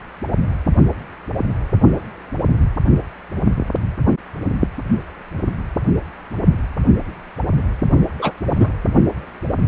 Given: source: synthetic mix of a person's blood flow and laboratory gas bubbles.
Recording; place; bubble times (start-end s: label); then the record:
Doppler ultrasound of blood flow; precordium
8.18-8.32 s: bubbles
8.49-8.68 s: bubbles
From the record:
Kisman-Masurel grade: 113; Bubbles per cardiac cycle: 1 to 2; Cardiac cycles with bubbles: 1 to 10%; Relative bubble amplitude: loud (0.450 to 0.775); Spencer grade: 1 (occasional bubble signal discernible with the cardiac motion signal, with majority of cardiac periods free of bubbles); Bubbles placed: anywhere in the cardiac cycle